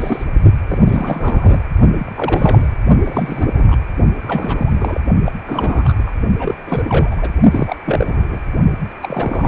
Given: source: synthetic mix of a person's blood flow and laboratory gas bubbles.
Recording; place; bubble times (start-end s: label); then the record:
Doppler ultrasound of blood flow; precordium
0.00-0.24 s: bubbles
0.68-0.79 s: bubbles
0.86-1.65 s: bubbles
1.98-2.12 s: bubbles
2.16-2.68 s: bubbles
3.04-3.77 s: bubbles
4.21-5.00 s: bubbles
5.24-5.32 s: bubbles
5.46-6.03 s: bubbles
6.06-6.11 s: bubbles
6.39-6.54 s: bubbles
6.65-7.29 s: bubbles
7.50-7.76 s: bubbles
7.86-8.40 s: bubbles
9.02-9.48 s: bubbles
From the record:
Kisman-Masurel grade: 342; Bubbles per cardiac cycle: rolling drumbeat, 9 or more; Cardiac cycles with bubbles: 100%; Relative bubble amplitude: moderate (0.250 to 0.450); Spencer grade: 3 (all of the cardiac periods contain showers or single bubble signals, but not dominating or overriding the cardiac motion signals); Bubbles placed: only in the low amplitude regions of the cardiac cycle